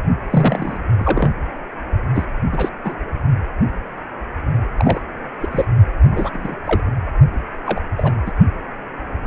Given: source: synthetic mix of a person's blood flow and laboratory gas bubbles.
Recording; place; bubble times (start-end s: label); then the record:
Doppler ultrasound of blood flow; precordium
0.30-0.79 s: bubbles
0.99-1.32 s: bubbles
2.15-2.26 s: bubbles
2.51-2.69 s: bubbles
2.84-2.96 s: bubbles
4.77-5.01 s: bubbles
5.40-5.65 s: bubbles
6.12-6.30 s: bubbles
6.33-6.58 s: bubbles
6.65-6.80 s: bubbles
7.66-7.80 s: bubbles
7.97-8.12 s: bubbles
8.25-8.31 s: bubbles
From the record:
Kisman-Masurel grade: 232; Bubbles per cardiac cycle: several, 3 to 8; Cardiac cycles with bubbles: 50 to 99%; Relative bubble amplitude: moderate (0.250 to 0.450); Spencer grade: 3 (all of the cardiac periods contain showers or single bubble signals, but not dominating or overriding the cardiac motion signals); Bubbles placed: only in the low amplitude regions of the cardiac cycle